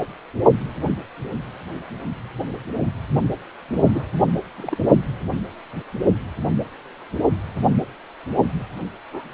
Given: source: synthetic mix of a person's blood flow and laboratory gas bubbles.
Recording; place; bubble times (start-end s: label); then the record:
Doppler ultrasound of blood flow; precordium
3.76-4.04 s: bubbles
4.57-4.77 s: bubbles
9.12-9.34 s: bubbles
From the record:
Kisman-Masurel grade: 121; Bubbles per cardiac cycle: 1 to 2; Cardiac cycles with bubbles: 10 to 50%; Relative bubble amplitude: barely perceptible (0.100 to 0.250); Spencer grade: 2 (many but less than half of the cardiac periods contain bubble signals, singularly or in groups); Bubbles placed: only in the low amplitude regions of the cardiac cycle